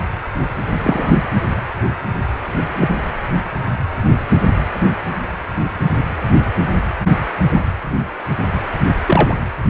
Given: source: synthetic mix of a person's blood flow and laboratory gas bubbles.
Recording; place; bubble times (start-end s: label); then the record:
Doppler ultrasound of blood flow; precordium
0.82-1.12 s: bubbles
2.81-2.88 s: bubbles
7.50-7.64 s: bubbles
9.07-9.34 s: bubbles
From the record:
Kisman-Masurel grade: 123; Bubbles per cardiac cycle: 1 to 2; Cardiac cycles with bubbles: 10 to 50%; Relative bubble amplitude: loud (0.450 to 0.775); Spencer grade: 2 (many but less than half of the cardiac periods contain bubble signals, singularly or in groups); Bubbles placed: anywhere in the cardiac cycle